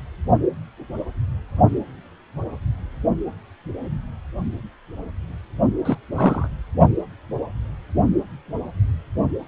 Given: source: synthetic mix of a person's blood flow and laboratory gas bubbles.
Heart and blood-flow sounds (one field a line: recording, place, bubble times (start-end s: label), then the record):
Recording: Doppler ultrasound of blood flow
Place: precordium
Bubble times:
5.85-5.98 s: bubbles
6.16-6.49 s: bubbles
From the record:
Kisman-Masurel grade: 212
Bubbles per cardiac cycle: several, 3 to 8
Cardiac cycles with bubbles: 1 to 10%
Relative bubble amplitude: moderate (0.250 to 0.450)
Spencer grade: 1 (occasional bubble signal discernible with the cardiac motion signal, with majority of cardiac periods free of bubbles)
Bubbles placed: only in the low amplitude regions of the cardiac cycle